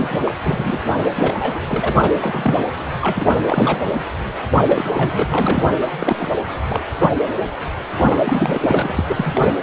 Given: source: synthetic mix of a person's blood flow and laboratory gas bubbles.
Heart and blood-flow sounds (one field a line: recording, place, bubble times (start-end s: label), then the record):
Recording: Doppler ultrasound of blood flow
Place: precordium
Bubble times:
0.00-0.19 s: bubbles
0.26-0.34 s: bubbles
0.46-0.81 s: bubbles
1.15-1.33 s: bubbles
1.39-1.60 s: bubbles
1.68-1.95 s: bubbles
2.02-2.65 s: bubbles
3.01-3.27 s: bubbles
3.46-3.93 s: bubbles
4.68-5.69 s: bubbles
5.99-6.29 s: bubbles
6.61-6.83 s: bubbles
6.98-7.12 s: bubbles
7.96-8.92 s: bubbles
8.95-9.50 s: bubbles
From the record:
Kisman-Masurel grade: 242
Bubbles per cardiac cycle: several, 3 to 8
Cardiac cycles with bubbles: 100%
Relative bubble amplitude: moderate (0.250 to 0.450)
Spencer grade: 3 (all of the cardiac periods contain showers or single bubble signals, but not dominating or overriding the cardiac motion signals)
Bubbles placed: anywhere in the cardiac cycle